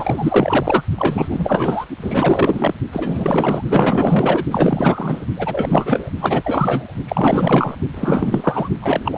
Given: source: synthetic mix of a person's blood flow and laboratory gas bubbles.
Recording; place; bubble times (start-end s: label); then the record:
Doppler ultrasound of blood flow; precordium
0.00-0.82 s: bubbles
0.97-1.86 s: bubbles
2.02-2.74 s: bubbles
2.92-3.62 s: bubbles
3.69-4.45 s: bubbles
4.50-5.26 s: bubbles
5.36-6.09 s: bubbles
6.21-6.93 s: bubbles
7.08-7.76 s: bubbles
7.94-8.69 s: bubbles
8.80-9.18 s: bubbles
From the record:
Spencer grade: 4 (maximum detectable bubble signal sounding continuously throughout systole and diastole of every cardiac period, and overriding the amplitude of the normal cardiac signals); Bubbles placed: only in the low amplitude regions of the cardiac cycle